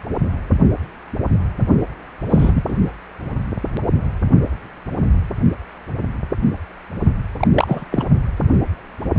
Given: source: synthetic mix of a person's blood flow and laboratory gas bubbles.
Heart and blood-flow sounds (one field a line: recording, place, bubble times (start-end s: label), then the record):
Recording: Doppler ultrasound of blood flow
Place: precordium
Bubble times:
2.29-2.63 s: bubbles
2.68-2.75 s: bubbles
7.39-7.47 s: bubbles
7.54-7.85 s: bubbles
7.90-8.04 s: bubbles
From the record:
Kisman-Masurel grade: 222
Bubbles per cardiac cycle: several, 3 to 8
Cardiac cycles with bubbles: 10 to 50%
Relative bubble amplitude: moderate (0.250 to 0.450)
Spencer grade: 2 (many but less than half of the cardiac periods contain bubble signals, singularly or in groups)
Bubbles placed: only in the low amplitude regions of the cardiac cycle